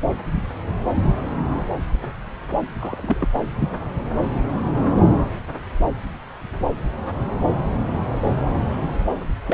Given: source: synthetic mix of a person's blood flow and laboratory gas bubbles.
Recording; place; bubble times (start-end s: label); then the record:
Doppler ultrasound of blood flow; subclavian vein
2.79-3.28 s: bubbles
3.60-3.69 s: bubbles
9.46-9.54 s: bubbles
From the record:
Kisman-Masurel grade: 121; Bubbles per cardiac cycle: 1 to 2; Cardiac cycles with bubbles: 10 to 50%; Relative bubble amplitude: barely perceptible (0.100 to 0.250); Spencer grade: 2 (many but less than half of the cardiac periods contain bubble signals, singularly or in groups); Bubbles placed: anywhere in the cardiac cycle